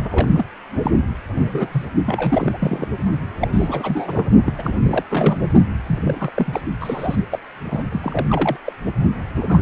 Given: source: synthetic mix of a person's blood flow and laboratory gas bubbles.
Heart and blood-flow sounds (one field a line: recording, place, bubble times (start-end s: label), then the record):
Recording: Doppler ultrasound of blood flow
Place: precordium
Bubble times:
0.11-0.28 s: bubbles
0.35-0.46 s: bubbles
0.82-0.91 s: bubbles
1.34-1.85 s: bubbles
2.06-2.88 s: bubbles
3.40-3.48 s: bubbles
3.52-4.26 s: bubbles
4.45-4.53 s: bubbles
4.58-4.70 s: bubbles
4.82-5.04 s: bubbles
5.09-5.52 s: bubbles
5.86-6.31 s: bubbles
6.34-6.61 s: bubbles
6.81-7.15 s: bubbles
7.30-7.39 s: bubbles
7.64-7.83 s: bubbles
7.92-8.57 s: bubbles
8.66-8.72 s: bubbles
9.40-9.62 s: bubbles
From the record:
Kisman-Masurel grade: 342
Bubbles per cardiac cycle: rolling drumbeat, 9 or more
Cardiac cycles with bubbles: 100%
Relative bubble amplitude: moderate (0.250 to 0.450)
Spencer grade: 3 (all of the cardiac periods contain showers or single bubble signals, but not dominating or overriding the cardiac motion signals)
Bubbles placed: only in the low amplitude regions of the cardiac cycle